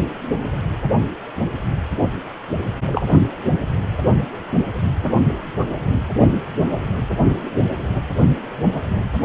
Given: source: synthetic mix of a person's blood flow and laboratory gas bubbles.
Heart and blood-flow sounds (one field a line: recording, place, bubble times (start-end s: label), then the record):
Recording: Doppler ultrasound of blood flow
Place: precordium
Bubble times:
2.92-3.12 s: bubbles
From the record:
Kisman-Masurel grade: 123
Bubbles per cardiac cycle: 1 to 2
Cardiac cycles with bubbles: 10 to 50%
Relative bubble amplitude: loud (0.450 to 0.775)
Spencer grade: 2 (many but less than half of the cardiac periods contain bubble signals, singularly or in groups)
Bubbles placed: anywhere in the cardiac cycle